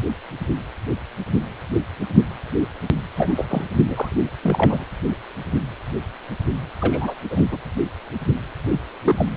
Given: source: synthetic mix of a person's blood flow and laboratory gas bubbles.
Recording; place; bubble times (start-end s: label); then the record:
Doppler ultrasound of blood flow; precordium
3.16-3.45 s: bubbles
3.48-3.63 s: bubbles
3.83-4.08 s: bubbles
4.12-4.16 s: bubbles
4.42-4.85 s: bubbles
6.79-7.15 s: bubbles
7.30-7.45 s: bubbles
7.51-7.58 s: bubbles
8.71-8.79 s: bubbles
9.04-9.26 s: bubbles
From the record:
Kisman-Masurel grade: 222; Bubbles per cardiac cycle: several, 3 to 8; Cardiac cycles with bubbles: 10 to 50%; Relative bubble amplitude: moderate (0.250 to 0.450); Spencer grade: 2 (many but less than half of the cardiac periods contain bubble signals, singularly or in groups); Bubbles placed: anywhere in the cardiac cycle